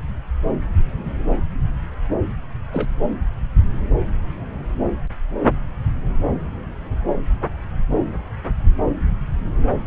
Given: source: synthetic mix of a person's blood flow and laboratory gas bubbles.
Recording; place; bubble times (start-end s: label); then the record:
Doppler ultrasound of blood flow; subclavian vein
2.73-2.87 s: bubbles
From the record:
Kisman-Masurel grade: 112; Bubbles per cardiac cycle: 1 to 2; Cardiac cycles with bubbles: 1 to 10%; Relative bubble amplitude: moderate (0.250 to 0.450); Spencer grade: 1 (occasional bubble signal discernible with the cardiac motion signal, with majority of cardiac periods free of bubbles); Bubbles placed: anywhere in the cardiac cycle